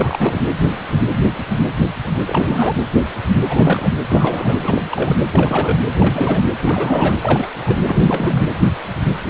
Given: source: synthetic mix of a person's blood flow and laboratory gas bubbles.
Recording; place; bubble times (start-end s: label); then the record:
Doppler ultrasound of blood flow; precordium
0.00-0.43 s: bubbles
2.27-2.73 s: bubbles
3.49-3.91 s: bubbles
4.08-4.57 s: bubbles
4.62-4.84 s: bubbles
4.91-5.14 s: bubbles
5.33-5.78 s: bubbles
5.99-6.43 s: bubbles
6.62-7.17 s: bubbles
7.21-7.47 s: bubbles
7.66-7.77 s: bubbles
7.87-8.47 s: bubbles
From the record:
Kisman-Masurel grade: 332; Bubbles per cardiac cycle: rolling drumbeat, 9 or more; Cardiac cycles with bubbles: 50 to 99%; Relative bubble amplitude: moderate (0.250 to 0.450); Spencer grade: 3 (all of the cardiac periods contain showers or single bubble signals, but not dominating or overriding the cardiac motion signals); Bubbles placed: anywhere in the cardiac cycle